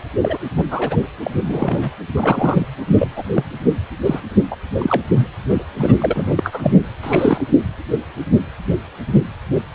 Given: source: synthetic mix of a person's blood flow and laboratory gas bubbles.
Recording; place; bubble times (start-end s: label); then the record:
Doppler ultrasound of blood flow; precordium
0.21-0.38 s: bubbles
0.56-0.64 s: bubbles
0.70-1.04 s: bubbles
1.24-1.31 s: bubbles
1.46-1.91 s: bubbles
2.16-2.66 s: bubbles
2.88-3.08 s: bubbles
3.16-3.24 s: bubbles
3.35-3.44 s: bubbles
4.04-4.20 s: bubbles
4.50-4.56 s: bubbles
4.78-5.01 s: bubbles
5.12-5.27 s: bubbles
5.48-5.63 s: bubbles
5.79-5.94 s: bubbles
6.00-6.33 s: bubbles
6.36-6.71 s: bubbles
7.03-7.44 s: bubbles
From the record:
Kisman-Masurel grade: 232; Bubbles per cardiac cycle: several, 3 to 8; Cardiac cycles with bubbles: 50 to 99%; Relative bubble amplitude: moderate (0.250 to 0.450); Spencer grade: 3 (all of the cardiac periods contain showers or single bubble signals, but not dominating or overriding the cardiac motion signals); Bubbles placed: anywhere in the cardiac cycle